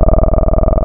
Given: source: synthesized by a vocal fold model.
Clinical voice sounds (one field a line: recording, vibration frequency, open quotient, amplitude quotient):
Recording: sustained vowel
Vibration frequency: 20 Hz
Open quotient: 0.4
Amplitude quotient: 1.2